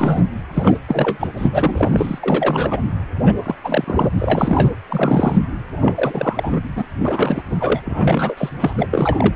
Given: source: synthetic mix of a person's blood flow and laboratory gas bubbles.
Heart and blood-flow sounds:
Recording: Doppler ultrasound of blood flow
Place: precordium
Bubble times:
0.00-0.24 s: bubbles
0.54-0.78 s: bubbles
0.88-1.27 s: bubbles
1.38-1.48 s: bubbles
1.52-2.19 s: bubbles
2.23-2.82 s: bubbles
3.26-3.33 s: bubbles
3.44-3.55 s: bubbles
3.64-4.07 s: bubbles
4.18-4.71 s: bubbles
4.88-5.38 s: bubbles
5.80-6.60 s: bubbles
6.75-6.85 s: bubbles
7.00-7.42 s: bubbles
7.50-7.80 s: bubbles
7.85-8.49 s: bubbles
8.58-8.73 s: bubbles
8.78-9.34 s: bubbles
From the record:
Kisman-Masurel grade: 343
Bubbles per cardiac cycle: rolling drumbeat, 9 or more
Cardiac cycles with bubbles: 100%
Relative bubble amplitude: loud (0.450 to 0.775)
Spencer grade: 3 (all of the cardiac periods contain showers or single bubble signals, but not dominating or overriding the cardiac motion signals)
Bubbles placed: anywhere in the cardiac cycle

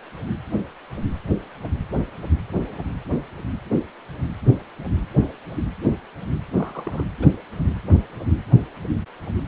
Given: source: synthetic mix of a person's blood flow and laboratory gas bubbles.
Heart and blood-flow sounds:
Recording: Doppler ultrasound of blood flow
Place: precordium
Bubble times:
6.56-7.04 s: bubbles
7.19-7.29 s: bubbles
From the record:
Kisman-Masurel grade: 111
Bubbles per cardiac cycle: 1 to 2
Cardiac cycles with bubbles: 1 to 10%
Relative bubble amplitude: barely perceptible (0.100 to 0.250)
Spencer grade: 1 (occasional bubble signal discernible with the cardiac motion signal, with majority of cardiac periods free of bubbles)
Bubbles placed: anywhere in the cardiac cycle

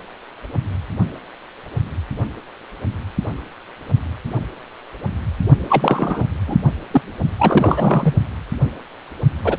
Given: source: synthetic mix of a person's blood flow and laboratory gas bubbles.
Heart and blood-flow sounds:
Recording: Doppler ultrasound of blood flow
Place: precordium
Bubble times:
5.69-6.27 s: bubbles
6.47-6.56 s: bubbles
6.91-7.01 s: bubbles
7.38-8.15 s: bubbles
9.44-9.57 s: bubbles
From the record:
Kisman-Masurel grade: 223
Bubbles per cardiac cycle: several, 3 to 8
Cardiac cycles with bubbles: 10 to 50%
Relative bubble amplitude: loud (0.450 to 0.775)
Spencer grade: 2 (many but less than half of the cardiac periods contain bubble signals, singularly or in groups)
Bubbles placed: only in the low amplitude regions of the cardiac cycle

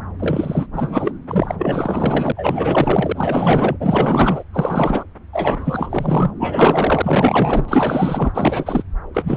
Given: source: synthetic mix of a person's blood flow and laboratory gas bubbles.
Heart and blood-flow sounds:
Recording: Doppler ultrasound of blood flow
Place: subclavian vein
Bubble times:
0.19-0.67 s: bubbles
0.73-1.11 s: bubbles
1.28-1.55 s: bubbles
1.57-2.32 s: bubbles
2.34-3.77 s: bubbles
3.80-4.43 s: bubbles
4.53-5.04 s: bubbles
5.33-6.31 s: bubbles
6.39-7.66 s: bubbles
7.68-8.32 s: bubbles
8.34-8.83 s: bubbles
9.15-9.37 s: bubbles
From the record:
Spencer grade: 4 (maximum detectable bubble signal sounding continuously throughout systole and diastole of every cardiac period, and overriding the amplitude of the normal cardiac signals)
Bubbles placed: anywhere in the cardiac cycle

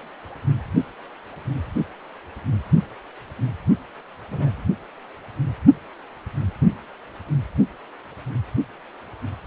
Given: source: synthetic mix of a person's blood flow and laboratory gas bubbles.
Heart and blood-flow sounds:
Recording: Doppler ultrasound of blood flow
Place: precordium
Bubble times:
4.30-4.64 s: bubbles
From the record:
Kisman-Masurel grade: 121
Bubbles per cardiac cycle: 1 to 2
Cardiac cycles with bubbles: 10 to 50%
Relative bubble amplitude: barely perceptible (0.100 to 0.250)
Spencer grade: 2 (many but less than half of the cardiac periods contain bubble signals, singularly or in groups)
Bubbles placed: only in the low amplitude regions of the cardiac cycle

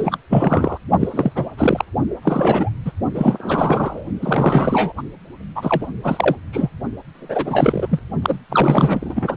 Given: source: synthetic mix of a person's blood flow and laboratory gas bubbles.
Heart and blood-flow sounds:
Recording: Doppler ultrasound of blood flow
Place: precordium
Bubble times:
0.00-0.18 s: bubbles
0.30-0.78 s: bubbles
0.99-1.49 s: bubbles
1.57-1.84 s: bubbles
2.22-2.71 s: bubbles
2.85-2.92 s: bubbles
3.15-4.05 s: bubbles
4.21-4.93 s: bubbles
4.97-5.02 s: bubbles
5.56-5.88 s: bubbles
6.03-6.36 s: bubbles
6.53-6.70 s: bubbles
7.15-7.88 s: bubbles
7.90-8.00 s: bubbles
8.22-8.39 s: bubbles
8.49-9.36 s: bubbles
From the record:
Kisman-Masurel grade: 343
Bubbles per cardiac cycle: rolling drumbeat, 9 or more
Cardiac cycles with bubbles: 100%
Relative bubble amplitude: loud (0.450 to 0.775)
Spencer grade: 3 (all of the cardiac periods contain showers or single bubble signals, but not dominating or overriding the cardiac motion signals)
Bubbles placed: only in the low amplitude regions of the cardiac cycle

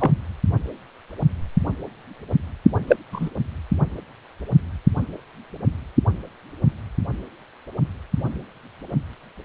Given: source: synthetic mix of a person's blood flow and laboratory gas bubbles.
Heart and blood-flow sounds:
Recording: Doppler ultrasound of blood flow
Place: precordium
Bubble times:
0.00-0.12 s: bubbles
2.87-2.96 s: bubbles
3.12-3.29 s: bubbles
From the record:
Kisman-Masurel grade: 123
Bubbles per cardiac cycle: 1 to 2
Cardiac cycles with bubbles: 10 to 50%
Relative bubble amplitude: loud (0.450 to 0.775)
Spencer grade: 2 (many but less than half of the cardiac periods contain bubble signals, singularly or in groups)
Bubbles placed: anywhere in the cardiac cycle

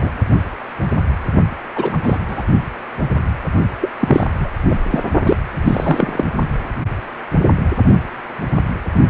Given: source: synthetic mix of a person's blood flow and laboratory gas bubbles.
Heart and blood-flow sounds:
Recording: Doppler ultrasound of blood flow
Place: precordium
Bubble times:
0.02-0.10 s: bubbles
1.76-1.98 s: bubbles
2.04-2.18 s: bubbles
2.27-2.43 s: bubbles
3.81-3.90 s: bubbles
4.00-4.26 s: bubbles
4.40-4.50 s: bubbles
4.69-4.75 s: bubbles
4.91-5.03 s: bubbles
5.25-5.36 s: bubbles
5.64-6.25 s: bubbles
From the record:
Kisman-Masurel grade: 233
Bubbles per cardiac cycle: several, 3 to 8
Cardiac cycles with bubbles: 50 to 99%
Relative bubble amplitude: loud (0.450 to 0.775)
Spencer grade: 3 (all of the cardiac periods contain showers or single bubble signals, but not dominating or overriding the cardiac motion signals)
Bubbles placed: only in the low amplitude regions of the cardiac cycle

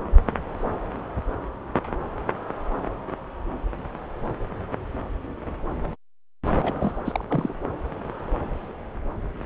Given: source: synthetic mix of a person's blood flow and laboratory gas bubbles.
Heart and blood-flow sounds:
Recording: Doppler ultrasound of blood flow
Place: subclavian vein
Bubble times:
6.62-6.92 s: bubbles
7.05-7.25 s: bubbles
7.29-7.54 s: bubbles
From the record:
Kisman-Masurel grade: 211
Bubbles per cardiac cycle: several, 3 to 8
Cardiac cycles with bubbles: 1 to 10%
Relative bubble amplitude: barely perceptible (0.100 to 0.250)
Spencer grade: 1 (occasional bubble signal discernible with the cardiac motion signal, with majority of cardiac periods free of bubbles)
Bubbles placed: anywhere in the cardiac cycle

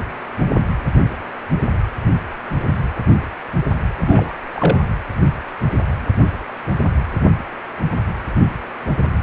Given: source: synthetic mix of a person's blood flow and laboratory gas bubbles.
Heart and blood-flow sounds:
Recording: Doppler ultrasound of blood flow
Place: precordium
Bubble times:
4.00-4.37 s: bubbles
4.54-4.80 s: bubbles
From the record:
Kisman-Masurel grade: 212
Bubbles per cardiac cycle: several, 3 to 8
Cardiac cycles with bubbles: 1 to 10%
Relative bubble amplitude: moderate (0.250 to 0.450)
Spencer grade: 1 (occasional bubble signal discernible with the cardiac motion signal, with majority of cardiac periods free of bubbles)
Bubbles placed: anywhere in the cardiac cycle

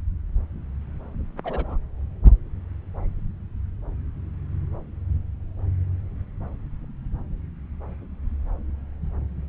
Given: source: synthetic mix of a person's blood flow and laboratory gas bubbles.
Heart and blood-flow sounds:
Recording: Doppler ultrasound of blood flow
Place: subclavian vein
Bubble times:
1.44-1.78 s: bubbles
From the record:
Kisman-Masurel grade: 121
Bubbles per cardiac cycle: 1 to 2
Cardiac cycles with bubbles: 10 to 50%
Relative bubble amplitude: barely perceptible (0.100 to 0.250)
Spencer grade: 2 (many but less than half of the cardiac periods contain bubble signals, singularly or in groups)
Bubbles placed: anywhere in the cardiac cycle

